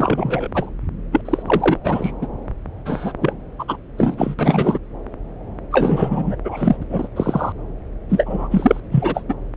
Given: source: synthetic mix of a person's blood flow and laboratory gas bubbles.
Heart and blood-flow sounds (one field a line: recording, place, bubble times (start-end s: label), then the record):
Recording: Doppler ultrasound of blood flow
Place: subclavian vein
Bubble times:
0.00-0.48 s: bubbles
0.54-0.70 s: bubbles
1.11-1.21 s: bubbles
1.25-1.42 s: bubbles
1.46-1.77 s: bubbles
1.83-2.11 s: bubbles
2.21-2.27 s: bubbles
2.85-3.12 s: bubbles
3.21-3.33 s: bubbles
3.59-3.65 s: bubbles
3.68-3.76 s: bubbles
3.97-4.34 s: bubbles
4.38-4.78 s: bubbles
5.71-6.36 s: bubbles
6.45-6.76 s: bubbles
6.89-7.08 s: bubbles
7.16-7.53 s: bubbles
8.10-8.80 s: bubbles
8.91-9.22 s: bubbles
9.29-9.35 s: bubbles
From the record:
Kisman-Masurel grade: 343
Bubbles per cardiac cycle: rolling drumbeat, 9 or more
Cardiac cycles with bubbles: 100%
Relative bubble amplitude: loud (0.450 to 0.775)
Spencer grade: 3 (all of the cardiac periods contain showers or single bubble signals, but not dominating or overriding the cardiac motion signals)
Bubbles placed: anywhere in the cardiac cycle